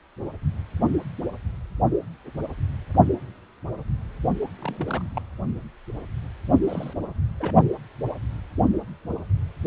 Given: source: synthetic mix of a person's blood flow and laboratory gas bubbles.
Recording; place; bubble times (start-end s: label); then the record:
Doppler ultrasound of blood flow; precordium
4.41-4.45 s: bubbles
4.58-5.02 s: bubbles
5.15-5.21 s: bubbles
6.62-6.94 s: bubbles
7.40-7.53 s: bubbles
From the record:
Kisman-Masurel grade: 221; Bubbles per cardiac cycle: several, 3 to 8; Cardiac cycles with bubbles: 10 to 50%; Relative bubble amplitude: barely perceptible (0.100 to 0.250); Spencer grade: 2 (many but less than half of the cardiac periods contain bubble signals, singularly or in groups); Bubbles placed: only in the low amplitude regions of the cardiac cycle